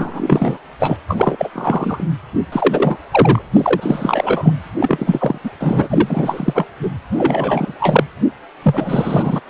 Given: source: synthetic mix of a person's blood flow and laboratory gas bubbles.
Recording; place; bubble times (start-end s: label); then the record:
Doppler ultrasound of blood flow; precordium
0.00-0.58 s: bubbles
0.79-0.97 s: bubbles
1.08-2.04 s: bubbles
2.52-2.99 s: bubbles
3.10-3.42 s: bubbles
3.53-4.53 s: bubbles
4.80-5.38 s: bubbles
5.44-5.50 s: bubbles
5.59-6.67 s: bubbles
6.82-6.90 s: bubbles
7.12-7.74 s: bubbles
7.78-8.04 s: bubbles
8.62-9.40 s: bubbles
From the record:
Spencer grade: 3 (all of the cardiac periods contain showers or single bubble signals, but not dominating or overriding the cardiac motion signals); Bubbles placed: anywhere in the cardiac cycle